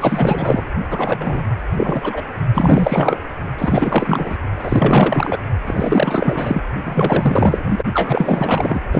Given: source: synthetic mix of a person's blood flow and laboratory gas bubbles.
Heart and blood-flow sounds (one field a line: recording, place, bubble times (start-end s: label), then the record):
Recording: Doppler ultrasound of blood flow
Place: precordium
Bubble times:
0.01-0.66 s: bubbles
0.91-1.45 s: bubbles
1.74-2.23 s: bubbles
2.54-3.17 s: bubbles
3.58-4.37 s: bubbles
4.59-5.38 s: bubbles
5.65-6.61 s: bubbles
6.83-7.82 s: bubbles
7.93-8.80 s: bubbles
8.93-9.00 s: bubbles
From the record:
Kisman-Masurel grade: 444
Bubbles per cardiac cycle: continuous sound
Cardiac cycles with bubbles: 100%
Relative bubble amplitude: maximal (0.775 to 0.999)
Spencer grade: 4 (maximum detectable bubble signal sounding continuously throughout systole and diastole of every cardiac period, and overriding the amplitude of the normal cardiac signals)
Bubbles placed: only in the low amplitude regions of the cardiac cycle